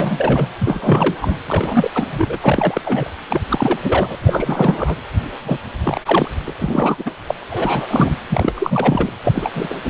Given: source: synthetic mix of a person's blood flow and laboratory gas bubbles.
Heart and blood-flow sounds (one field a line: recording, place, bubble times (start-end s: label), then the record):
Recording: Doppler ultrasound of blood flow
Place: precordium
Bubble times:
0.00-0.47 s: bubbles
0.59-1.36 s: bubbles
1.47-1.91 s: bubbles
1.95-2.08 s: bubbles
2.12-2.27 s: bubbles
2.29-2.38 s: bubbles
2.41-2.81 s: bubbles
2.84-3.08 s: bubbles
3.29-3.41 s: bubbles
3.50-3.79 s: bubbles
3.83-4.16 s: bubbles
4.21-4.96 s: bubbles
5.45-5.58 s: bubbles
5.83-6.01 s: bubbles
6.05-6.28 s: bubbles
6.45-6.50 s: bubbles
6.58-7.12 s: bubbles
7.27-7.34 s: bubbles
7.50-8.16 s: bubbles
8.29-9.09 s: bubbles
9.23-9.52 s: bubbles
9.55-9.81 s: bubbles
9.84-9.90 s: bubbles
From the record:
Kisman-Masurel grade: 343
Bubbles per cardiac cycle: rolling drumbeat, 9 or more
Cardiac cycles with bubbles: 100%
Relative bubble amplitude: loud (0.450 to 0.775)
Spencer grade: 3 (all of the cardiac periods contain showers or single bubble signals, but not dominating or overriding the cardiac motion signals)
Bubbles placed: anywhere in the cardiac cycle